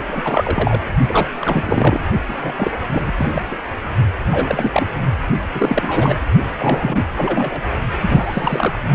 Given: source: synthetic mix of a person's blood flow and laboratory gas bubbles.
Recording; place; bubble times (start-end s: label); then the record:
Doppler ultrasound of blood flow; precordium
0.00-0.02 s: bubbles
0.08-0.81 s: bubbles
1.06-1.28 s: bubbles
1.40-2.00 s: bubbles
2.28-2.38 s: bubbles
2.42-2.71 s: bubbles
2.91-3.12 s: bubbles
3.17-3.45 s: bubbles
3.50-3.56 s: bubbles
4.31-4.87 s: bubbles
5.54-6.20 s: bubbles
6.58-7.04 s: bubbles
7.15-7.62 s: bubbles
8.01-8.79 s: bubbles
From the record:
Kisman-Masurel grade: 343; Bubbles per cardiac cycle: rolling drumbeat, 9 or more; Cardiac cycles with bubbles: 100%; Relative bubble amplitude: loud (0.450 to 0.775); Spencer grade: 3 (all of the cardiac periods contain showers or single bubble signals, but not dominating or overriding the cardiac motion signals); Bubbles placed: only in the low amplitude regions of the cardiac cycle